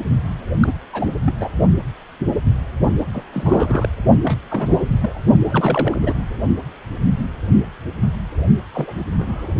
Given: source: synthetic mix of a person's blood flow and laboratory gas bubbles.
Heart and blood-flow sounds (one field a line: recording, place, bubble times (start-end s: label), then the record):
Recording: Doppler ultrasound of blood flow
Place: precordium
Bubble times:
0.60-0.73 s: bubbles
0.93-1.10 s: bubbles
1.25-1.34 s: bubbles
1.40-1.48 s: bubbles
3.13-3.23 s: bubbles
3.33-3.89 s: bubbles
4.23-4.38 s: bubbles
4.50-5.20 s: bubbles
5.50-5.97 s: bubbles
6.02-6.13 s: bubbles
8.73-8.95 s: bubbles
9.18-9.53 s: bubbles
From the record:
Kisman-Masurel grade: 232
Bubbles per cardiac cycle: several, 3 to 8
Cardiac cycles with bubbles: 50 to 99%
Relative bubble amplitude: moderate (0.250 to 0.450)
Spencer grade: 3 (all of the cardiac periods contain showers or single bubble signals, but not dominating or overriding the cardiac motion signals)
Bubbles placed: only in the low amplitude regions of the cardiac cycle